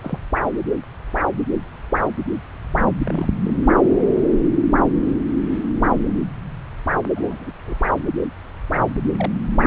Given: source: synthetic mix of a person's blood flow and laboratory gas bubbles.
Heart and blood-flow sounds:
Doppler ultrasound of blood flow; subclavian vein
0.01-0.18 s: bubbles
3.04-3.25 s: bubbles
3.42-3.54 s: bubbles
7.15-7.52 s: bubbles
7.65-7.77 s: bubbles
9.18-9.31 s: bubbles
From the record:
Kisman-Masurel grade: 121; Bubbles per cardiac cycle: 1 to 2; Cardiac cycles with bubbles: 10 to 50%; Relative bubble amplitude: barely perceptible (0.100 to 0.250); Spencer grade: 2 (many but less than half of the cardiac periods contain bubble signals, singularly or in groups); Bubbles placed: anywhere in the cardiac cycle

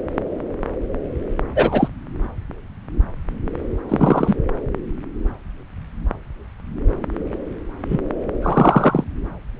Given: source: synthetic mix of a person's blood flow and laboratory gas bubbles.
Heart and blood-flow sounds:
Doppler ultrasound of blood flow; subclavian vein
1.55-1.88 s: bubbles
3.88-4.35 s: bubbles
7.89-8.00 s: bubbles
8.42-9.04 s: bubbles
From the record:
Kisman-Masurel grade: 123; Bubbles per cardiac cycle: 1 to 2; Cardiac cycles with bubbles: 10 to 50%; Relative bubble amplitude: loud (0.450 to 0.775); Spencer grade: 2 (many but less than half of the cardiac periods contain bubble signals, singularly or in groups); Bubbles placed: anywhere in the cardiac cycle

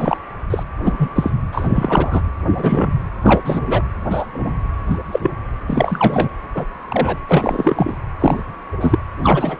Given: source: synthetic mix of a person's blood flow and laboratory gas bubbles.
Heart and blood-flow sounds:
Doppler ultrasound of blood flow; precordium
0.00-0.17 s: bubbles
0.50-0.63 s: bubbles
0.84-1.11 s: bubbles
1.16-1.30 s: bubbles
1.52-2.21 s: bubbles
2.57-2.98 s: bubbles
3.22-3.42 s: bubbles
3.45-3.61 s: bubbles
3.66-3.82 s: bubbles
4.10-4.26 s: bubbles
4.32-4.57 s: bubbles
4.88-4.96 s: bubbles
5.12-5.20 s: bubbles
5.22-5.30 s: bubbles
5.67-6.29 s: bubbles
6.54-6.65 s: bubbles
6.89-7.18 s: bubbles
7.28-7.97 s: bubbles
8.19-8.40 s: bubbles
8.80-8.98 s: bubbles
9.22-9.57 s: bubbles
From the record:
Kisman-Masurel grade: 243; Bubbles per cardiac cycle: several, 3 to 8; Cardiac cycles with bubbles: 100%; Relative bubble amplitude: loud (0.450 to 0.775); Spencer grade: 3 (all of the cardiac periods contain showers or single bubble signals, but not dominating or overriding the cardiac motion signals); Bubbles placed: anywhere in the cardiac cycle

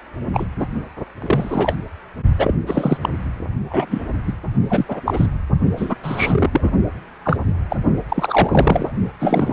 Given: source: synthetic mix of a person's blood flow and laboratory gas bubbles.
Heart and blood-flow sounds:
Doppler ultrasound of blood flow; precordium
0.34-0.46 s: bubbles
0.59-0.67 s: bubbles
1.22-1.75 s: bubbles
2.37-2.54 s: bubbles
2.67-2.98 s: bubbles
3.02-3.09 s: bubbles
3.70-4.10 s: bubbles
4.27-4.34 s: bubbles
4.70-4.86 s: bubbles
4.88-5.00 s: bubbles
5.05-5.27 s: bubbles
5.77-5.96 s: bubbles
6.03-6.71 s: bubbles
7.25-7.37 s: bubbles
7.70-7.76 s: bubbles
8.09-8.92 s: bubbles
9.20-9.53 s: bubbles
From the record:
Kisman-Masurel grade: 242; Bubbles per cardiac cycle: several, 3 to 8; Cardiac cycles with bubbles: 100%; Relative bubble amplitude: moderate (0.250 to 0.450); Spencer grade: 3 (all of the cardiac periods contain showers or single bubble signals, but not dominating or overriding the cardiac motion signals); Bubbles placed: only in the low amplitude regions of the cardiac cycle

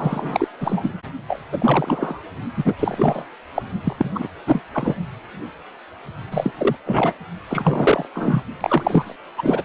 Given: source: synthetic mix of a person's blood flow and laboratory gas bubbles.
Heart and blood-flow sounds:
Doppler ultrasound of blood flow; precordium
0.00-0.48 s: bubbles
0.60-0.92 s: bubbles
1.28-1.39 s: bubbles
1.52-2.19 s: bubbles
2.56-2.75 s: bubbles
2.79-3.25 s: bubbles
3.55-3.62 s: bubbles
3.83-4.11 s: bubbles
4.14-4.28 s: bubbles
4.46-4.62 s: bubbles
4.74-4.95 s: bubbles
6.31-6.50 s: bubbles
6.58-6.76 s: bubbles
6.85-7.12 s: bubbles
7.49-8.05 s: bubbles
8.14-8.43 s: bubbles
8.61-9.16 s: bubbles
9.38-9.62 s: bubbles
From the record:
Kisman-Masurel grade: 332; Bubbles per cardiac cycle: rolling drumbeat, 9 or more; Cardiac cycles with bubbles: 50 to 99%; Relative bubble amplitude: moderate (0.250 to 0.450); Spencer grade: 3 (all of the cardiac periods contain showers or single bubble signals, but not dominating or overriding the cardiac motion signals); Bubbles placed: only in the low amplitude regions of the cardiac cycle

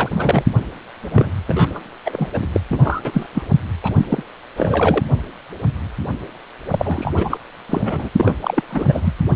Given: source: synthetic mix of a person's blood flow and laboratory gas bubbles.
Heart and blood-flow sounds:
Doppler ultrasound of blood flow; precordium
0.00-0.09 s: bubbles
0.15-0.43 s: bubbles
1.02-1.31 s: bubbles
1.47-1.79 s: bubbles
2.04-2.30 s: bubbles
2.33-2.48 s: bubbles
2.54-2.60 s: bubbles
2.71-3.01 s: bubbles
3.05-3.10 s: bubbles
3.13-3.27 s: bubbles
3.34-3.43 s: bubbles
3.83-4.05 s: bubbles
4.09-4.23 s: bubbles
4.56-5.04 s: bubbles
6.71-7.12 s: bubbles
7.16-7.38 s: bubbles
7.69-8.11 s: bubbles
8.16-8.34 s: bubbles
8.42-8.62 s: bubbles
8.68-9.13 s: bubbles
From the record:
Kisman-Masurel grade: 332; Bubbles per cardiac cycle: rolling drumbeat, 9 or more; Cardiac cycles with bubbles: 50 to 99%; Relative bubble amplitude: moderate (0.250 to 0.450); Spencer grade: 3 (all of the cardiac periods contain showers or single bubble signals, but not dominating or overriding the cardiac motion signals); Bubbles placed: anywhere in the cardiac cycle

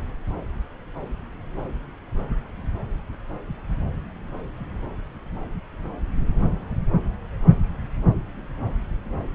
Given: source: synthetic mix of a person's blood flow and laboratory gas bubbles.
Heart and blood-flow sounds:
Doppler ultrasound of blood flow; subclavian vein
no bubbles
From the record:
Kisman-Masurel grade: 000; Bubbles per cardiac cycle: 0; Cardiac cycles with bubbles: 0%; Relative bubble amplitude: no bubbles discernible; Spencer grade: 0 (complete lack of bubble signals)

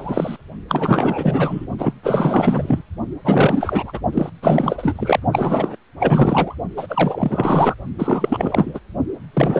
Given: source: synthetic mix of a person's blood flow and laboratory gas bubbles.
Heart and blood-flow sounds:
Doppler ultrasound of blood flow; precordium
0.00-0.37 s: bubbles
0.68-1.67 s: bubbles
1.78-1.93 s: bubbles
2.03-2.83 s: bubbles
3.24-4.00 s: bubbles
4.12-4.30 s: bubbles
4.42-5.20 s: bubbles
5.32-5.76 s: bubbles
5.99-6.55 s: bubbles
6.77-7.75 s: bubbles
7.98-8.80 s: bubbles
9.33-9.60 s: bubbles
From the record:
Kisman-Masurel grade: 444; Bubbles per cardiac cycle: continuous sound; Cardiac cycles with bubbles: 100%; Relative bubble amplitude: maximal (0.775 to 0.999); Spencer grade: 4 (maximum detectable bubble signal sounding continuously throughout systole and diastole of every cardiac period, and overriding the amplitude of the normal cardiac signals); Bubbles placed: only in the low amplitude regions of the cardiac cycle

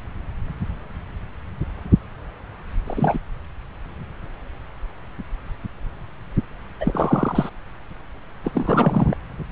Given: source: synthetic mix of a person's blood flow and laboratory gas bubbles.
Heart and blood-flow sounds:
Doppler ultrasound of blood flow; subclavian vein
2.86-3.19 s: bubbles
6.80-7.50 s: bubbles
8.44-9.16 s: bubbles
From the record:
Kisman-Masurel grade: 222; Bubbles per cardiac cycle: several, 3 to 8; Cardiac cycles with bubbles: 10 to 50%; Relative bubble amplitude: moderate (0.250 to 0.450); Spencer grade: 2 (many but less than half of the cardiac periods contain bubble signals, singularly or in groups); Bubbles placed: anywhere in the cardiac cycle

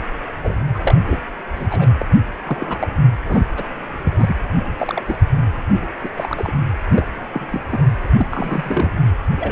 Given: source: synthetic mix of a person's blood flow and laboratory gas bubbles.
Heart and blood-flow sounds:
Doppler ultrasound of blood flow; precordium
0.41-0.61 s: bubbles
0.75-0.79 s: bubbles
0.82-0.95 s: bubbles
1.06-1.20 s: bubbles
1.55-1.90 s: bubbles
1.98-2.06 s: bubbles
2.44-2.88 s: bubbles
3.25-3.41 s: bubbles
3.56-3.63 s: bubbles
4.04-4.40 s: bubbles
4.79-5.16 s: bubbles
5.68-5.86 s: bubbles
6.03-6.09 s: bubbles
6.17-6.53 s: bubbles
6.93-7.06 s: bubbles
7.33-7.47 s: bubbles
7.52-7.61 s: bubbles
7.70-7.79 s: bubbles
8.00-8.90 s: bubbles
9.37-9.52 s: bubbles
From the record:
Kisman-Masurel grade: 242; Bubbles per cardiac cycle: several, 3 to 8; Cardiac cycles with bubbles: 100%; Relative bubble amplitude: moderate (0.250 to 0.450); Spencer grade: 3 (all of the cardiac periods contain showers or single bubble signals, but not dominating or overriding the cardiac motion signals); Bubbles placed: anywhere in the cardiac cycle

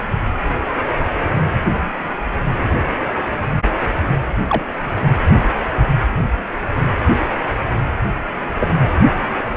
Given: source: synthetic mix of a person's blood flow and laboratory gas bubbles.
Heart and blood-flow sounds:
Doppler ultrasound of blood flow; precordium
4.49-4.65 s: bubbles
8.60-8.71 s: bubbles
From the record:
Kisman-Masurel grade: 122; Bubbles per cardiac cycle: 1 to 2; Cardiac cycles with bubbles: 10 to 50%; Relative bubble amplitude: moderate (0.250 to 0.450); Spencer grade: 2 (many but less than half of the cardiac periods contain bubble signals, singularly or in groups); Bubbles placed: anywhere in the cardiac cycle

